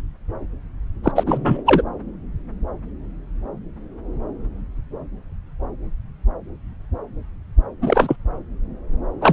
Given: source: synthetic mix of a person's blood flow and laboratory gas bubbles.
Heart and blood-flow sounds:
Doppler ultrasound of blood flow; subclavian vein
1.03-1.11 s: bubbles
1.15-1.23 s: bubbles
1.26-1.62 s: bubbles
1.66-1.82 s: bubbles
7.81-8.16 s: bubbles
9.21-9.33 s: bubbles
From the record:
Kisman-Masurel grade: 223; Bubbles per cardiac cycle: several, 3 to 8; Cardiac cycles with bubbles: 10 to 50%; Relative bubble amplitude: loud (0.450 to 0.775); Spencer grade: 2 (many but less than half of the cardiac periods contain bubble signals, singularly or in groups); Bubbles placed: anywhere in the cardiac cycle

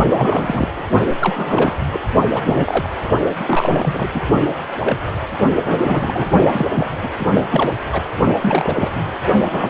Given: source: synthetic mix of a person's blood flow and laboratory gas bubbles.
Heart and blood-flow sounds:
Doppler ultrasound of blood flow; precordium
0.08-0.83 s: bubbles
1.20-1.81 s: bubbles
1.92-2.00 s: bubbles
2.31-2.90 s: bubbles
3.39-4.21 s: bubbles
4.80-4.96 s: bubbles
5.56-6.28 s: bubbles
6.51-6.92 s: bubbles
7.03-7.09 s: bubbles
7.19-7.26 s: bubbles
7.33-7.43 s: bubbles
7.50-7.73 s: bubbles
7.90-8.03 s: bubbles
8.41-8.91 s: bubbles
8.95-9.12 s: bubbles
9.52-9.70 s: bubbles
From the record:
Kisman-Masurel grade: 342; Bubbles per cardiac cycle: rolling drumbeat, 9 or more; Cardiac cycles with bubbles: 100%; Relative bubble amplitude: moderate (0.250 to 0.450); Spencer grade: 3 (all of the cardiac periods contain showers or single bubble signals, but not dominating or overriding the cardiac motion signals); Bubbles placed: only in the low amplitude regions of the cardiac cycle

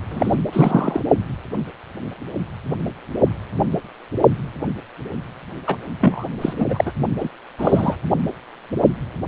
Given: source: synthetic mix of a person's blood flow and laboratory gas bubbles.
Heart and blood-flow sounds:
Doppler ultrasound of blood flow; precordium
0.09-0.36 s: bubbles
0.52-1.02 s: bubbles
5.67-5.76 s: bubbles
6.00-6.25 s: bubbles
6.41-6.54 s: bubbles
6.57-6.66 s: bubbles
6.70-6.92 s: bubbles
7.20-7.29 s: bubbles
7.59-7.96 s: bubbles
From the record:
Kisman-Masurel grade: 223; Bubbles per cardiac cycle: several, 3 to 8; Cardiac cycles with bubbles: 10 to 50%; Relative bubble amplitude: loud (0.450 to 0.775); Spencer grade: 2 (many but less than half of the cardiac periods contain bubble signals, singularly or in groups); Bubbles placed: only in the low amplitude regions of the cardiac cycle

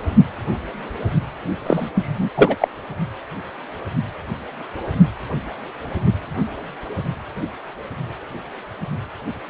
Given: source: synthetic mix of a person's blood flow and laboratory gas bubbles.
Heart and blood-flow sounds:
Doppler ultrasound of blood flow; precordium
1.66-1.89 s: bubbles
1.94-2.31 s: bubbles
2.35-2.56 s: bubbles
2.58-2.68 s: bubbles
From the record:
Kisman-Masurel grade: 213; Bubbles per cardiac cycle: several, 3 to 8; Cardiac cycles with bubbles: 1 to 10%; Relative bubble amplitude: loud (0.450 to 0.775); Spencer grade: 1 (occasional bubble signal discernible with the cardiac motion signal, with majority of cardiac periods free of bubbles); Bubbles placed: only in the low amplitude regions of the cardiac cycle

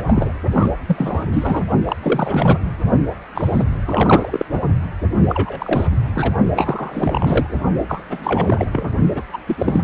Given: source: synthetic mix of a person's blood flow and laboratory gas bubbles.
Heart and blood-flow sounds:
Doppler ultrasound of blood flow; precordium
0.00-0.33 s: bubbles
0.51-0.69 s: bubbles
0.87-1.25 s: bubbles
1.32-1.63 s: bubbles
1.87-1.96 s: bubbles
2.02-2.58 s: bubbles
3.34-3.63 s: bubbles
3.85-4.46 s: bubbles
4.51-4.60 s: bubbles
5.28-5.88 s: bubbles
6.15-6.33 s: bubbles
6.55-7.54 s: bubbles
7.89-8.03 s: bubbles
8.10-8.66 s: bubbles
8.72-8.93 s: bubbles
9.15-9.23 s: bubbles
9.33-9.38 s: bubbles
9.47-9.81 s: bubbles
From the record:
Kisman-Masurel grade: 343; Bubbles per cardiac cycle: rolling drumbeat, 9 or more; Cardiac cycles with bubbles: 100%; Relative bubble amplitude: loud (0.450 to 0.775); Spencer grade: 3 (all of the cardiac periods contain showers or single bubble signals, but not dominating or overriding the cardiac motion signals); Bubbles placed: only in the low amplitude regions of the cardiac cycle

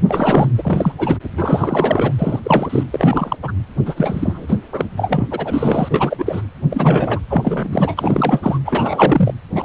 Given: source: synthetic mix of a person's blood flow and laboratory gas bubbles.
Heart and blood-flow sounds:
Doppler ultrasound of blood flow; precordium
0.08-0.48 s: bubbles
0.57-0.92 s: bubbles
0.98-1.17 s: bubbles
1.37-2.12 s: bubbles
2.18-2.40 s: bubbles
2.43-2.84 s: bubbles
2.92-3.36 s: bubbles
3.42-3.51 s: bubbles
3.85-4.56 s: bubbles
4.72-4.85 s: bubbles
4.97-5.28 s: bubbles
5.31-6.42 s: bubbles
6.70-7.19 s: bubbles
7.29-8.58 s: bubbles
8.64-9.32 s: bubbles
9.55-9.65 s: bubbles
From the record:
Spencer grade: 3 (all of the cardiac periods contain showers or single bubble signals, but not dominating or overriding the cardiac motion signals); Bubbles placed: anywhere in the cardiac cycle

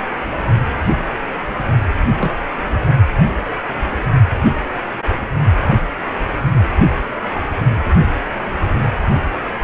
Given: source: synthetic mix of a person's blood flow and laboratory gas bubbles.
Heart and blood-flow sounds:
Doppler ultrasound of blood flow; precordium
2.19-2.32 s: bubbles
From the record:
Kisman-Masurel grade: 112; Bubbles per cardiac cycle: 1 to 2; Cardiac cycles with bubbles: 1 to 10%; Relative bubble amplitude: moderate (0.250 to 0.450); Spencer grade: 1 (occasional bubble signal discernible with the cardiac motion signal, with majority of cardiac periods free of bubbles); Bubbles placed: only in the low amplitude regions of the cardiac cycle

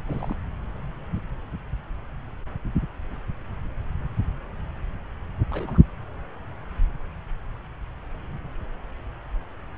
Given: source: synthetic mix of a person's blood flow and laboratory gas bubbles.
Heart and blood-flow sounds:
Doppler ultrasound of blood flow; subclavian vein
0.08-0.35 s: bubbles
5.50-5.79 s: bubbles
From the record:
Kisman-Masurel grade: 121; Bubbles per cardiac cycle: 1 to 2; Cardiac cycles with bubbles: 10 to 50%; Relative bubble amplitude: barely perceptible (0.100 to 0.250); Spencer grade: 2 (many but less than half of the cardiac periods contain bubble signals, singularly or in groups); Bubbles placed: anywhere in the cardiac cycle

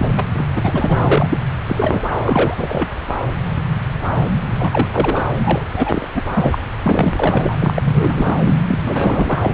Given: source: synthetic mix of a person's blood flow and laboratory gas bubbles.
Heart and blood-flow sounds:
Doppler ultrasound of blood flow; subclavian vein
0.00-0.25 s: bubbles
0.33-0.46 s: bubbles
0.56-1.38 s: bubbles
1.66-2.10 s: bubbles
2.17-2.88 s: bubbles
4.58-4.88 s: bubbles
4.92-5.29 s: bubbles
5.36-5.63 s: bubbles
5.73-6.08 s: bubbles
6.15-6.23 s: bubbles
6.34-6.58 s: bubbles
6.83-7.74 s: bubbles
7.78-8.57 s: bubbles
8.68-8.79 s: bubbles
8.83-9.39 s: bubbles
9.42-9.53 s: bubbles
From the record:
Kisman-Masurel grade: 332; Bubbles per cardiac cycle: rolling drumbeat, 9 or more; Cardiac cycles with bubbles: 50 to 99%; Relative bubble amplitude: moderate (0.250 to 0.450); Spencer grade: 3 (all of the cardiac periods contain showers or single bubble signals, but not dominating or overriding the cardiac motion signals); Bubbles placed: anywhere in the cardiac cycle

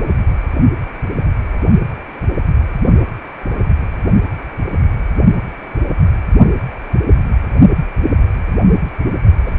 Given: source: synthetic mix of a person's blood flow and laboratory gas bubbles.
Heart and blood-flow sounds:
Doppler ultrasound of blood flow; precordium
9.46-9.54 s: bubbles
From the record:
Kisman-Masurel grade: 212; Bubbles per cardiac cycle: several, 3 to 8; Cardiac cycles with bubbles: 1 to 10%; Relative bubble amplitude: moderate (0.250 to 0.450); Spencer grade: 1 (occasional bubble signal discernible with the cardiac motion signal, with majority of cardiac periods free of bubbles); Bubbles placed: only in the low amplitude regions of the cardiac cycle

